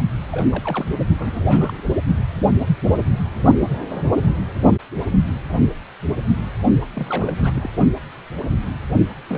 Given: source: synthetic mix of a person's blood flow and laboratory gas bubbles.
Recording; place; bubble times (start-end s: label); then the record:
Doppler ultrasound of blood flow; precordium
0.32-0.89 s: bubbles
1.19-1.81 s: bubbles
6.94-7.33 s: bubbles
7.36-7.52 s: bubbles
7.55-7.70 s: bubbles
9.28-9.38 s: bubbles
From the record:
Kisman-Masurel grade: 221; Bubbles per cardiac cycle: several, 3 to 8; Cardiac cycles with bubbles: 10 to 50%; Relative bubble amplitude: barely perceptible (0.100 to 0.250); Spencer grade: 2 (many but less than half of the cardiac periods contain bubble signals, singularly or in groups); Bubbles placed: only in the low amplitude regions of the cardiac cycle